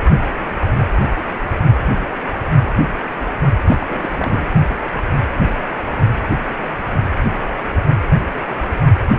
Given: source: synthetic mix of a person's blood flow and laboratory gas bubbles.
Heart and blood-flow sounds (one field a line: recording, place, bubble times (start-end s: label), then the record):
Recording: Doppler ultrasound of blood flow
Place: precordium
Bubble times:
3.66-3.78 s: bubbles
3.80-3.87 s: bubbles
3.89-4.49 s: bubbles
From the record:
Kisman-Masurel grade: 211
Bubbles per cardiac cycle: several, 3 to 8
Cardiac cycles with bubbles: 1 to 10%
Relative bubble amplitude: barely perceptible (0.100 to 0.250)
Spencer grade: 1 (occasional bubble signal discernible with the cardiac motion signal, with majority of cardiac periods free of bubbles)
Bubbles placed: anywhere in the cardiac cycle